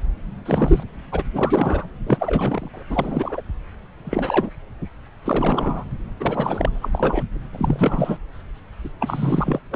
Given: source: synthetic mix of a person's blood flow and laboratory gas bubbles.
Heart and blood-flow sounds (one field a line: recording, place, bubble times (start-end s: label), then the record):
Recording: Doppler ultrasound of blood flow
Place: subclavian vein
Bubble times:
0.45-0.83 s: bubbles
1.12-1.23 s: bubbles
1.33-1.87 s: bubbles
2.06-2.69 s: bubbles
2.73-2.83 s: bubbles
2.89-3.42 s: bubbles
4.04-4.50 s: bubbles
5.25-5.84 s: bubbles
6.20-6.70 s: bubbles
6.75-6.89 s: bubbles
6.92-7.24 s: bubbles
7.52-8.18 s: bubbles
9.00-9.60 s: bubbles
9.71-9.76 s: bubbles
From the record:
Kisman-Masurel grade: 332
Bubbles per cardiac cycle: rolling drumbeat, 9 or more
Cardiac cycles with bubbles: 50 to 99%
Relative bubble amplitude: moderate (0.250 to 0.450)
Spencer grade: 3 (all of the cardiac periods contain showers or single bubble signals, but not dominating or overriding the cardiac motion signals)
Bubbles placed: anywhere in the cardiac cycle